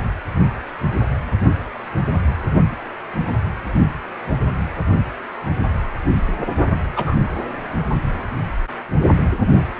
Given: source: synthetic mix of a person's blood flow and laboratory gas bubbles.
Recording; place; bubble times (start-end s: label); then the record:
Doppler ultrasound of blood flow; precordium
6.96-7.15 s: bubbles
From the record:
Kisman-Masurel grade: 112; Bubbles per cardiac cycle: 1 to 2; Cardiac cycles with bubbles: 1 to 10%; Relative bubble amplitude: moderate (0.250 to 0.450); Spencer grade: 1 (occasional bubble signal discernible with the cardiac motion signal, with majority of cardiac periods free of bubbles); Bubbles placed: only in the low amplitude regions of the cardiac cycle